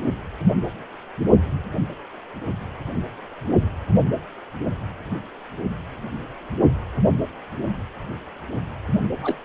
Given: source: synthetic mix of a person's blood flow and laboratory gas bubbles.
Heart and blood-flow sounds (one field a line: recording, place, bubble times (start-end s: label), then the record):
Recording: Doppler ultrasound of blood flow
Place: precordium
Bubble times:
9.22-9.35 s: bubbles
From the record:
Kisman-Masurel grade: 112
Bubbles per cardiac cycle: 1 to 2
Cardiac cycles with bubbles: 1 to 10%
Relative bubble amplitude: moderate (0.250 to 0.450)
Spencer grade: 1 (occasional bubble signal discernible with the cardiac motion signal, with majority of cardiac periods free of bubbles)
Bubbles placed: only in the low amplitude regions of the cardiac cycle